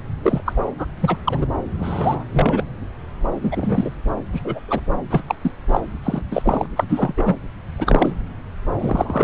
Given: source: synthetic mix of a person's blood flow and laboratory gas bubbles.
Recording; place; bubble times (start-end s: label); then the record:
Doppler ultrasound of blood flow; subclavian vein
0.22-0.41 s: bubbles
0.45-0.53 s: bubbles
0.77-0.86 s: bubbles
0.99-1.17 s: bubbles
1.24-1.45 s: bubbles
1.79-2.24 s: bubbles
2.32-2.64 s: bubbles
3.41-3.92 s: bubbles
4.33-4.41 s: bubbles
4.44-4.59 s: bubbles
4.68-4.80 s: bubbles
5.10-5.21 s: bubbles
5.26-5.35 s: bubbles
5.42-5.51 s: bubbles
5.68-5.80 s: bubbles
6.03-6.21 s: bubbles
6.31-6.67 s: bubbles
6.76-6.84 s: bubbles
6.88-7.13 s: bubbles
7.17-7.35 s: bubbles
7.76-8.14 s: bubbles
8.79-9.24 s: bubbles
From the record:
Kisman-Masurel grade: 233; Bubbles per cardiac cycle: several, 3 to 8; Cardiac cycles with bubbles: 50 to 99%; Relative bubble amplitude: loud (0.450 to 0.775); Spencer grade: 3 (all of the cardiac periods contain showers or single bubble signals, but not dominating or overriding the cardiac motion signals); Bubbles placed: anywhere in the cardiac cycle